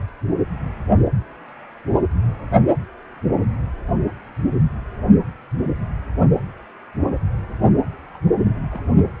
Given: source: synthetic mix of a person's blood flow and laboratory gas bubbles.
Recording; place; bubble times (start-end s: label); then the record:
Doppler ultrasound of blood flow; precordium
8.13-8.17 s: bubbles
8.45-8.50 s: bubbles
8.71-8.80 s: bubbles
From the record:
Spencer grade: 1 (occasional bubble signal discernible with the cardiac motion signal, with majority of cardiac periods free of bubbles); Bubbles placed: only in the low amplitude regions of the cardiac cycle